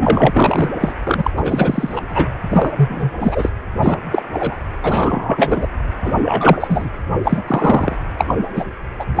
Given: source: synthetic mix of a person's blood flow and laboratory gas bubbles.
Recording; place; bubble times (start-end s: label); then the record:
Doppler ultrasound of blood flow; precordium
0.00-0.70 s: bubbles
0.81-0.92 s: bubbles
1.04-1.31 s: bubbles
1.37-1.40 s: bubbles
1.44-2.02 s: bubbles
2.09-2.26 s: bubbles
2.50-2.72 s: bubbles
2.77-3.11 s: bubbles
3.20-3.50 s: bubbles
3.82-4.00 s: bubbles
4.12-4.23 s: bubbles
4.33-4.57 s: bubbles
4.82-5.67 s: bubbles
6.03-6.16 s: bubbles
6.22-6.90 s: bubbles
7.21-7.42 s: bubbles
7.47-7.96 s: bubbles
8.18-8.25 s: bubbles
8.27-8.35 s: bubbles
8.55-8.65 s: bubbles
8.99-9.05 s: bubbles
9.15-9.20 s: bubbles
From the record:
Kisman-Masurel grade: 243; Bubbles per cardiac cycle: several, 3 to 8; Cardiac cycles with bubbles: 100%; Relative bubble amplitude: loud (0.450 to 0.775); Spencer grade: 3 (all of the cardiac periods contain showers or single bubble signals, but not dominating or overriding the cardiac motion signals); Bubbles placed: anywhere in the cardiac cycle